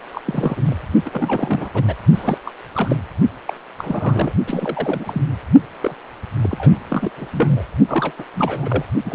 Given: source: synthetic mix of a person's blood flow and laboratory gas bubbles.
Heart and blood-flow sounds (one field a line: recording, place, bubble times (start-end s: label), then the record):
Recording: Doppler ultrasound of blood flow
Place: precordium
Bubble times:
0.11-0.21 s: bubbles
0.25-0.76 s: bubbles
1.05-1.69 s: bubbles
1.74-1.83 s: bubbles
1.88-1.95 s: bubbles
2.15-2.38 s: bubbles
2.46-2.52 s: bubbles
2.73-2.98 s: bubbles
3.47-3.54 s: bubbles
3.78-4.32 s: bubbles
4.46-5.23 s: bubbles
5.82-5.94 s: bubbles
6.41-6.79 s: bubbles
6.90-7.11 s: bubbles
7.17-7.26 s: bubbles
7.32-7.63 s: bubbles
7.88-8.13 s: bubbles
8.18-8.24 s: bubbles
8.35-8.84 s: bubbles
9.04-9.15 s: bubbles
From the record:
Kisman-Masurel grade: 342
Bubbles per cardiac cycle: rolling drumbeat, 9 or more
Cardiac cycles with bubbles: 100%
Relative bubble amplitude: moderate (0.250 to 0.450)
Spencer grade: 3 (all of the cardiac periods contain showers or single bubble signals, but not dominating or overriding the cardiac motion signals)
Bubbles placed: only in the low amplitude regions of the cardiac cycle